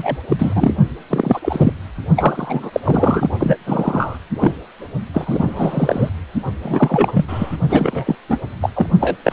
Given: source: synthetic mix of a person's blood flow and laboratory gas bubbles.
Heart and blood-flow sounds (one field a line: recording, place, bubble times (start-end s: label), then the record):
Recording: Doppler ultrasound of blood flow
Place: precordium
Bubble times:
0.00-0.17 s: bubbles
0.28-0.75 s: bubbles
1.09-1.72 s: bubbles
2.16-2.80 s: bubbles
2.83-3.30 s: bubbles
3.38-3.57 s: bubbles
3.66-4.18 s: bubbles
4.38-4.54 s: bubbles
5.13-6.09 s: bubbles
6.63-7.25 s: bubbles
7.27-7.57 s: bubbles
7.69-8.15 s: bubbles
8.29-8.40 s: bubbles
8.61-8.70 s: bubbles
8.75-8.86 s: bubbles
9.00-9.17 s: bubbles
9.24-9.33 s: bubbles
From the record:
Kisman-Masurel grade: 343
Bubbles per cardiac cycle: rolling drumbeat, 9 or more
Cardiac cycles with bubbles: 100%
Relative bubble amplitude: loud (0.450 to 0.775)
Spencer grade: 3 (all of the cardiac periods contain showers or single bubble signals, but not dominating or overriding the cardiac motion signals)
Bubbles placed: only in the low amplitude regions of the cardiac cycle